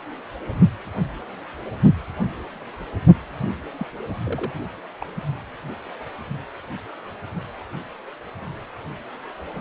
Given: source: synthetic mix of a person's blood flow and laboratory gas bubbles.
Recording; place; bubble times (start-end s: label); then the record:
Doppler ultrasound of blood flow; precordium
3.77-3.87 s: bubbles
4.24-4.52 s: bubbles
4.56-4.58 s: bubbles
5.01-5.06 s: bubbles
From the record:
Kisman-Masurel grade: 121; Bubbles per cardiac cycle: 1 to 2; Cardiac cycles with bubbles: 10 to 50%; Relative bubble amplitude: barely perceptible (0.100 to 0.250); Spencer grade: 2 (many but less than half of the cardiac periods contain bubble signals, singularly or in groups); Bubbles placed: anywhere in the cardiac cycle